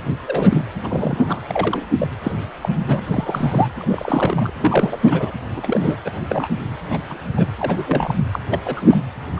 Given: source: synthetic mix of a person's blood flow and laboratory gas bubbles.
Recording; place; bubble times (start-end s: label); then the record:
Doppler ultrasound of blood flow; precordium
0.27-0.66 s: bubbles
0.76-1.44 s: bubbles
1.47-1.85 s: bubbles
1.98-2.08 s: bubbles
2.23-2.32 s: bubbles
2.61-2.69 s: bubbles
2.82-3.00 s: bubbles
3.08-3.68 s: bubbles
3.77-4.50 s: bubbles
4.59-4.97 s: bubbles
5.03-5.31 s: bubbles
5.56-5.97 s: bubbles
6.04-6.11 s: bubbles
6.29-6.47 s: bubbles
6.90-6.98 s: bubbles
7.09-7.31 s: bubbles
7.36-7.47 s: bubbles
7.59-8.15 s: bubbles
8.31-8.39 s: bubbles
8.50-8.59 s: bubbles
8.64-9.01 s: bubbles
9.35-9.40 s: bubbles
From the record:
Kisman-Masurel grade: 242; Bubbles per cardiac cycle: several, 3 to 8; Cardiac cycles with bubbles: 100%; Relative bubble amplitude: moderate (0.250 to 0.450); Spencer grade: 3 (all of the cardiac periods contain showers or single bubble signals, but not dominating or overriding the cardiac motion signals); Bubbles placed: anywhere in the cardiac cycle